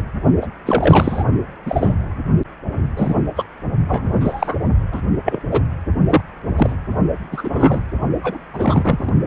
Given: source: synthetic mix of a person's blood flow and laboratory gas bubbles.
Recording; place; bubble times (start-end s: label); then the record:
Doppler ultrasound of blood flow; precordium
0.00-0.04 s: bubbles
0.41-0.47 s: bubbles
0.66-1.24 s: bubbles
1.66-1.94 s: bubbles
2.96-3.15 s: bubbles
3.36-3.44 s: bubbles
3.88-4.09 s: bubbles
4.21-4.55 s: bubbles
4.92-5.01 s: bubbles
5.25-5.41 s: bubbles
5.51-5.61 s: bubbles
6.09-6.21 s: bubbles
6.56-6.73 s: bubbles
7.31-7.82 s: bubbles
8.23-8.39 s: bubbles
8.53-9.13 s: bubbles
From the record:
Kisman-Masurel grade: 233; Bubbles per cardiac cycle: several, 3 to 8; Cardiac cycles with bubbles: 50 to 99%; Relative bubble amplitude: loud (0.450 to 0.775); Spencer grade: 3 (all of the cardiac periods contain showers or single bubble signals, but not dominating or overriding the cardiac motion signals); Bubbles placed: only in the low amplitude regions of the cardiac cycle